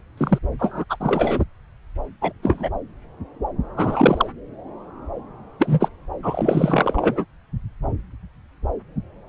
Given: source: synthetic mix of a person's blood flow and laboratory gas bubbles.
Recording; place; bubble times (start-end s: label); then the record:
Doppler ultrasound of blood flow; subclavian vein
0.17-0.39 s: bubbles
0.59-0.84 s: bubbles
0.89-0.96 s: bubbles
1.00-1.44 s: bubbles
2.21-2.32 s: bubbles
2.42-2.70 s: bubbles
3.77-4.28 s: bubbles
5.59-5.89 s: bubbles
6.23-7.25 s: bubbles
From the record:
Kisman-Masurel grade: 223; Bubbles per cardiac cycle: several, 3 to 8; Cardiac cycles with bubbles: 10 to 50%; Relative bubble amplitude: loud (0.450 to 0.775); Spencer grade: 2 (many but less than half of the cardiac periods contain bubble signals, singularly or in groups); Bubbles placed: anywhere in the cardiac cycle